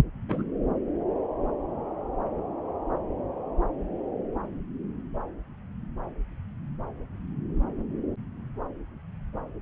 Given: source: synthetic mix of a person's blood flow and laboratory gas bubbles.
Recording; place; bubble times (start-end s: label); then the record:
Doppler ultrasound of blood flow; subclavian vein
0.29-0.44 s: bubbles
From the record:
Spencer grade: 1 (occasional bubble signal discernible with the cardiac motion signal, with majority of cardiac periods free of bubbles); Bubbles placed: anywhere in the cardiac cycle